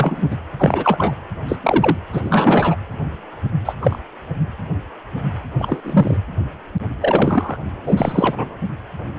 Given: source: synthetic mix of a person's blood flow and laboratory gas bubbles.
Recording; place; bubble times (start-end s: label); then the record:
Doppler ultrasound of blood flow; precordium
0.00-0.22 s: bubbles
0.30-0.37 s: bubbles
0.58-1.15 s: bubbles
1.48-1.56 s: bubbles
1.63-1.98 s: bubbles
2.12-2.76 s: bubbles
3.65-3.73 s: bubbles
3.81-3.98 s: bubbles
5.59-6.17 s: bubbles
7.02-7.57 s: bubbles
7.84-8.56 s: bubbles
From the record:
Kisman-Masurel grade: 233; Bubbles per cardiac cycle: several, 3 to 8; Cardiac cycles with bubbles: 50 to 99%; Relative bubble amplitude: loud (0.450 to 0.775); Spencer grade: 3 (all of the cardiac periods contain showers or single bubble signals, but not dominating or overriding the cardiac motion signals); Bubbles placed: anywhere in the cardiac cycle